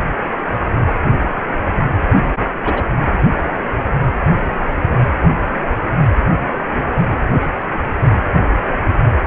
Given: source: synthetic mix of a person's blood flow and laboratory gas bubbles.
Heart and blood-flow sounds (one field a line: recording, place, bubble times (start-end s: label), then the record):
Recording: Doppler ultrasound of blood flow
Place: precordium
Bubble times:
2.64-2.91 s: bubbles
From the record:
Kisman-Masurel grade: 113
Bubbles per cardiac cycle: 1 to 2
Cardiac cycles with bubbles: 1 to 10%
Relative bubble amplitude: loud (0.450 to 0.775)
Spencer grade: 1 (occasional bubble signal discernible with the cardiac motion signal, with majority of cardiac periods free of bubbles)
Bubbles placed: anywhere in the cardiac cycle